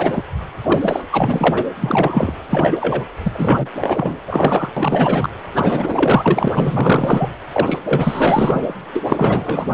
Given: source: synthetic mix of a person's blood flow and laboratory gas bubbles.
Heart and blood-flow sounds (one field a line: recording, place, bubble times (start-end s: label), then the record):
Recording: Doppler ultrasound of blood flow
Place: precordium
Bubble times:
0.00-0.25 s: bubbles
0.62-1.02 s: bubbles
1.11-1.66 s: bubbles
1.80-2.33 s: bubbles
2.50-3.04 s: bubbles
3.23-3.69 s: bubbles
3.80-4.20 s: bubbles
4.26-4.72 s: bubbles
4.76-5.29 s: bubbles
5.55-6.48 s: bubbles
6.51-7.30 s: bubbles
7.53-7.79 s: bubbles
7.84-8.75 s: bubbles
8.94-9.04 s: bubbles
9.06-9.74 s: bubbles
From the record:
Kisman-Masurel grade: 444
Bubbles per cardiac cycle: continuous sound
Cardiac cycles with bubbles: 100%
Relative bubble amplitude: maximal (0.775 to 0.999)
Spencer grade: 4 (maximum detectable bubble signal sounding continuously throughout systole and diastole of every cardiac period, and overriding the amplitude of the normal cardiac signals)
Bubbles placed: anywhere in the cardiac cycle